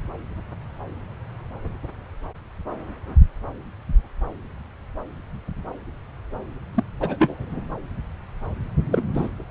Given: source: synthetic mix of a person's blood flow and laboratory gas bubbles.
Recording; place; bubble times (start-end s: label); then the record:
Doppler ultrasound of blood flow; subclavian vein
6.75-6.84 s: bubbles
7.00-7.64 s: bubbles
8.92-9.02 s: bubbles
9.13-9.29 s: bubbles
From the record:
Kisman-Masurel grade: 222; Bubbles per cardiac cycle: several, 3 to 8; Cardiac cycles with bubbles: 10 to 50%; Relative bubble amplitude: moderate (0.250 to 0.450); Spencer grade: 2 (many but less than half of the cardiac periods contain bubble signals, singularly or in groups); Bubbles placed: anywhere in the cardiac cycle